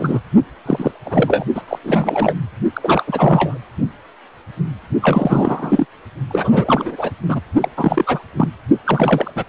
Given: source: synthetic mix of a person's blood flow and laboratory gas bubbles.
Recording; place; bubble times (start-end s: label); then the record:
Doppler ultrasound of blood flow; precordium
0.00-0.21 s: bubbles
0.66-0.91 s: bubbles
1.05-1.45 s: bubbles
1.55-1.62 s: bubbles
1.67-1.79 s: bubbles
1.83-2.33 s: bubbles
2.74-3.59 s: bubbles
5.02-5.86 s: bubbles
6.30-7.12 s: bubbles
7.29-7.41 s: bubbles
7.60-7.69 s: bubbles
7.77-8.19 s: bubbles
8.36-8.48 s: bubbles
8.84-9.31 s: bubbles
9.35-9.44 s: bubbles
From the record:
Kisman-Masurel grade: 333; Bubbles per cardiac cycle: rolling drumbeat, 9 or more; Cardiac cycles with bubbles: 50 to 99%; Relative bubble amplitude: loud (0.450 to 0.775); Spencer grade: 3 (all of the cardiac periods contain showers or single bubble signals, but not dominating or overriding the cardiac motion signals); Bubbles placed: only in the low amplitude regions of the cardiac cycle